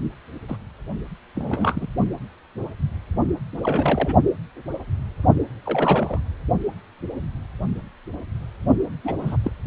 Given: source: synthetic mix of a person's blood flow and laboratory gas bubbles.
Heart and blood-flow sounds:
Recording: Doppler ultrasound of blood flow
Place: precordium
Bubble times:
0.48-0.58 s: bubbles
1.35-1.87 s: bubbles
3.63-4.15 s: bubbles
5.66-6.20 s: bubbles
9.04-9.15 s: bubbles
9.21-9.37 s: bubbles
9.44-9.51 s: bubbles
From the record:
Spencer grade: 2 (many but less than half of the cardiac periods contain bubble signals, singularly or in groups)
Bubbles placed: only in the low amplitude regions of the cardiac cycle

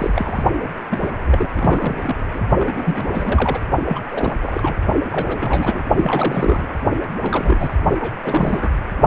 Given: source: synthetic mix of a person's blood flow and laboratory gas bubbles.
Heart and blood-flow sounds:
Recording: Doppler ultrasound of blood flow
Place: precordium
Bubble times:
0.00-0.43 s: bubbles
0.62-0.70 s: bubbles
0.90-1.08 s: bubbles
1.16-1.49 s: bubbles
1.54-2.25 s: bubbles
2.33-2.42 s: bubbles
2.58-3.61 s: bubbles
3.86-4.00 s: bubbles
4.10-4.36 s: bubbles
4.42-4.76 s: bubbles
4.96-5.01 s: bubbles
5.05-5.83 s: bubbles
5.96-6.67 s: bubbles
7.22-7.76 s: bubbles
7.99-8.18 s: bubbles
8.24-8.72 s: bubbles
From the record:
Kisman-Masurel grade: 342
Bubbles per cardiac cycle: rolling drumbeat, 9 or more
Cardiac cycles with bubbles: 100%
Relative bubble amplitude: moderate (0.250 to 0.450)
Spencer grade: 3 (all of the cardiac periods contain showers or single bubble signals, but not dominating or overriding the cardiac motion signals)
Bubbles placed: only in the low amplitude regions of the cardiac cycle

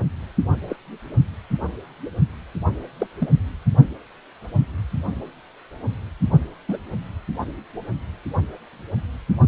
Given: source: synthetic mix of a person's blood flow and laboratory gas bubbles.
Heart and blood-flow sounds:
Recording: Doppler ultrasound of blood flow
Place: precordium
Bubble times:
0.69-0.76 s: bubbles
2.99-3.07 s: bubbles
3.19-3.29 s: bubbles
6.68-6.76 s: bubbles
From the record:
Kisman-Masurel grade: 122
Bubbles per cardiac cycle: 1 to 2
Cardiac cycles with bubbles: 10 to 50%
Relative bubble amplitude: moderate (0.250 to 0.450)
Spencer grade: 2 (many but less than half of the cardiac periods contain bubble signals, singularly or in groups)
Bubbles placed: only in the low amplitude regions of the cardiac cycle

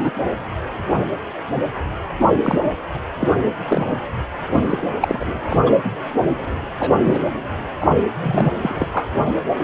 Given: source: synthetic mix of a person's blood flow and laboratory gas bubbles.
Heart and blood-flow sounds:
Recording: Doppler ultrasound of blood flow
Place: precordium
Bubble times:
0.00-0.10 s: bubbles
2.19-2.31 s: bubbles
2.42-2.59 s: bubbles
2.64-2.72 s: bubbles
3.20-3.29 s: bubbles
3.68-3.94 s: bubbles
4.52-4.85 s: bubbles
5.00-5.25 s: bubbles
5.48-5.56 s: bubbles
5.65-5.72 s: bubbles
5.84-5.89 s: bubbles
6.79-6.90 s: bubbles
7.04-7.20 s: bubbles
7.80-7.96 s: bubbles
8.22-8.51 s: bubbles
8.61-8.88 s: bubbles
8.92-9.08 s: bubbles
From the record:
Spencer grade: 3 (all of the cardiac periods contain showers or single bubble signals, but not dominating or overriding the cardiac motion signals)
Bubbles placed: anywhere in the cardiac cycle

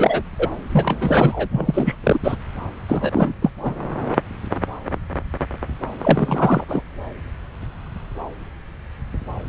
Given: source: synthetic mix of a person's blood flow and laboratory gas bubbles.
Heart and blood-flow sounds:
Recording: Doppler ultrasound of blood flow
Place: subclavian vein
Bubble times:
0.00-0.22 s: bubbles
0.39-0.48 s: bubbles
0.71-1.48 s: bubbles
1.51-1.96 s: bubbles
2.03-2.19 s: bubbles
2.23-2.36 s: bubbles
2.88-3.35 s: bubbles
3.42-3.50 s: bubbles
3.56-3.82 s: bubbles
6.02-6.64 s: bubbles
6.68-6.83 s: bubbles
From the record:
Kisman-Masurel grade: 333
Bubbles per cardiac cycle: rolling drumbeat, 9 or more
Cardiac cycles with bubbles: 50 to 99%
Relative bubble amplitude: loud (0.450 to 0.775)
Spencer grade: 3 (all of the cardiac periods contain showers or single bubble signals, but not dominating or overriding the cardiac motion signals)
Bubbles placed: anywhere in the cardiac cycle

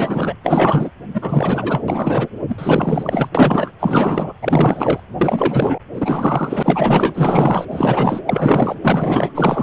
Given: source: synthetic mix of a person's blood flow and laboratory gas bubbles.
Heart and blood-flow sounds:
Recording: Doppler ultrasound of blood flow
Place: precordium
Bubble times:
0.00-0.35 s: bubbles
0.43-0.90 s: bubbles
1.14-1.83 s: bubbles
1.88-2.27 s: bubbles
2.48-3.29 s: bubbles
3.35-3.71 s: bubbles
3.80-4.33 s: bubbles
4.42-5.00 s: bubbles
5.17-5.79 s: bubbles
5.93-7.65 s: bubbles
7.70-8.21 s: bubbles
8.26-8.75 s: bubbles
8.82-9.63 s: bubbles
From the record:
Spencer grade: 4 (maximum detectable bubble signal sounding continuously throughout systole and diastole of every cardiac period, and overriding the amplitude of the normal cardiac signals)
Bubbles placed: anywhere in the cardiac cycle

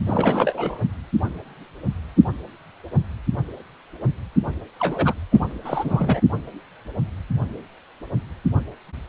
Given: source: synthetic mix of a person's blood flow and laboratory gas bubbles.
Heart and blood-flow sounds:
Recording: Doppler ultrasound of blood flow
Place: precordium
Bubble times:
0.07-0.81 s: bubbles
4.79-5.14 s: bubbles
5.31-5.46 s: bubbles
5.64-6.21 s: bubbles
From the record:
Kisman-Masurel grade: 222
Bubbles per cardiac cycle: several, 3 to 8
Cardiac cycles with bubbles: 10 to 50%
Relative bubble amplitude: moderate (0.250 to 0.450)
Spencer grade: 2 (many but less than half of the cardiac periods contain bubble signals, singularly or in groups)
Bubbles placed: only in the low amplitude regions of the cardiac cycle

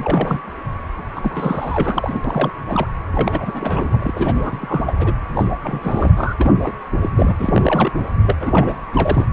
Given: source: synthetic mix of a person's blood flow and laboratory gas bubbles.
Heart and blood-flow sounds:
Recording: Doppler ultrasound of blood flow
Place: precordium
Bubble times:
0.00-0.40 s: bubbles
1.15-2.21 s: bubbles
2.24-2.51 s: bubbles
2.62-2.88 s: bubbles
3.13-4.57 s: bubbles
4.60-4.95 s: bubbles
4.99-5.13 s: bubbles
5.33-5.45 s: bubbles
5.62-6.12 s: bubbles
6.16-6.34 s: bubbles
6.39-6.54 s: bubbles
6.60-6.75 s: bubbles
7.01-7.09 s: bubbles
7.16-7.35 s: bubbles
7.39-7.92 s: bubbles
7.95-8.07 s: bubbles
8.20-8.35 s: bubbles
8.40-8.78 s: bubbles
8.92-9.25 s: bubbles
From the record:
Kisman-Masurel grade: 342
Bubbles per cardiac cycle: rolling drumbeat, 9 or more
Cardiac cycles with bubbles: 100%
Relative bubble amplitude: moderate (0.250 to 0.450)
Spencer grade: 3 (all of the cardiac periods contain showers or single bubble signals, but not dominating or overriding the cardiac motion signals)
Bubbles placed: anywhere in the cardiac cycle

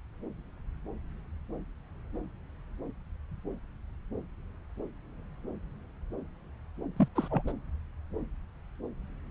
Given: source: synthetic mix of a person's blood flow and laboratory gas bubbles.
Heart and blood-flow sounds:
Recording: Doppler ultrasound of blood flow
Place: subclavian vein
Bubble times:
6.96-7.07 s: bubbles
7.15-7.28 s: bubbles
7.30-7.41 s: bubbles
7.47-7.52 s: bubbles
From the record:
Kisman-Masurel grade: 211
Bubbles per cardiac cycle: several, 3 to 8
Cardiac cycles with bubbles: 1 to 10%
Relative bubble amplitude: barely perceptible (0.100 to 0.250)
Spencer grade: 1 (occasional bubble signal discernible with the cardiac motion signal, with majority of cardiac periods free of bubbles)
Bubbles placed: anywhere in the cardiac cycle

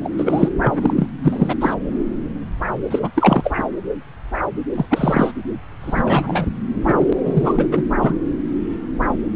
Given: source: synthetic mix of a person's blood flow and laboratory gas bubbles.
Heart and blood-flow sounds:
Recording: Doppler ultrasound of blood flow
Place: subclavian vein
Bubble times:
0.00-0.09 s: bubbles
0.17-0.49 s: bubbles
0.61-1.08 s: bubbles
1.23-1.55 s: bubbles
1.61-1.74 s: bubbles
2.90-3.09 s: bubbles
3.15-3.51 s: bubbles
3.57-3.63 s: bubbles
4.73-4.85 s: bubbles
4.89-5.32 s: bubbles
5.83-6.46 s: bubbles
6.83-7.13 s: bubbles
7.25-7.68 s: bubbles
7.71-7.82 s: bubbles
8.01-8.17 s: bubbles
From the record:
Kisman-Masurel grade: 333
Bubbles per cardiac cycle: rolling drumbeat, 9 or more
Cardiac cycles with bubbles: 50 to 99%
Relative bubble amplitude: loud (0.450 to 0.775)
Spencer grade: 3 (all of the cardiac periods contain showers or single bubble signals, but not dominating or overriding the cardiac motion signals)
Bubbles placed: anywhere in the cardiac cycle

